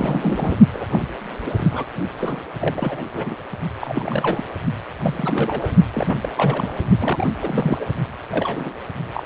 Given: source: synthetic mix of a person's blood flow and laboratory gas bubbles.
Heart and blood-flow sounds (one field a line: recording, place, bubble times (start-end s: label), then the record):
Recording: Doppler ultrasound of blood flow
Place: precordium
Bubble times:
0.00-0.56 s: bubbles
0.73-0.86 s: bubbles
0.89-1.07 s: bubbles
1.42-1.51 s: bubbles
1.57-1.85 s: bubbles
2.17-2.40 s: bubbles
2.60-3.03 s: bubbles
3.13-3.35 s: bubbles
3.80-4.44 s: bubbles
5.02-5.72 s: bubbles
5.93-6.29 s: bubbles
6.37-6.76 s: bubbles
6.99-7.27 s: bubbles
7.42-7.84 s: bubbles
8.30-8.73 s: bubbles
9.13-9.23 s: bubbles
From the record:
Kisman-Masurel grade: 342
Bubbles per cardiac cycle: rolling drumbeat, 9 or more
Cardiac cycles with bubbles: 100%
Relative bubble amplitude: moderate (0.250 to 0.450)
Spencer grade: 3 (all of the cardiac periods contain showers or single bubble signals, but not dominating or overriding the cardiac motion signals)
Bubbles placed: only in the low amplitude regions of the cardiac cycle